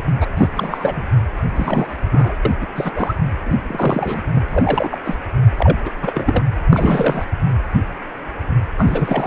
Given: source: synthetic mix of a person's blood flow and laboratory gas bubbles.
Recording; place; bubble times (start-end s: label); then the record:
Doppler ultrasound of blood flow; precordium
0.00-0.06 s: bubbles
0.17-0.32 s: bubbles
0.37-0.48 s: bubbles
0.55-1.02 s: bubbles
1.56-1.97 s: bubbles
2.12-2.37 s: bubbles
2.45-2.54 s: bubbles
2.61-2.67 s: bubbles
2.75-2.92 s: bubbles
2.95-3.14 s: bubbles
3.46-3.55 s: bubbles
3.67-4.21 s: bubbles
4.34-4.41 s: bubbles
4.51-4.97 s: bubbles
5.04-5.17 s: bubbles
5.58-5.76 s: bubbles
5.85-5.91 s: bubbles
6.01-6.44 s: bubbles
6.72-7.25 s: bubbles
8.78-9.26 s: bubbles
From the record:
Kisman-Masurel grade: 332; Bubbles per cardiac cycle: rolling drumbeat, 9 or more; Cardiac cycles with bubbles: 50 to 99%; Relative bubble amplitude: moderate (0.250 to 0.450); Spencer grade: 3 (all of the cardiac periods contain showers or single bubble signals, but not dominating or overriding the cardiac motion signals); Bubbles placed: anywhere in the cardiac cycle